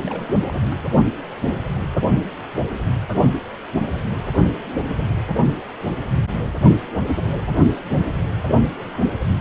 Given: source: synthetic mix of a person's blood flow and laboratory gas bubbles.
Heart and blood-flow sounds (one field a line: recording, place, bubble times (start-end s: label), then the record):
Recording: Doppler ultrasound of blood flow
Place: precordium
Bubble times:
0.00-0.57 s: bubbles
0.69-0.77 s: bubbles
From the record:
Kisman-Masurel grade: 211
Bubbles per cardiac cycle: several, 3 to 8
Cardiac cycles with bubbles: 1 to 10%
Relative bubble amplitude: barely perceptible (0.100 to 0.250)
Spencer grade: 1 (occasional bubble signal discernible with the cardiac motion signal, with majority of cardiac periods free of bubbles)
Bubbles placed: only in the low amplitude regions of the cardiac cycle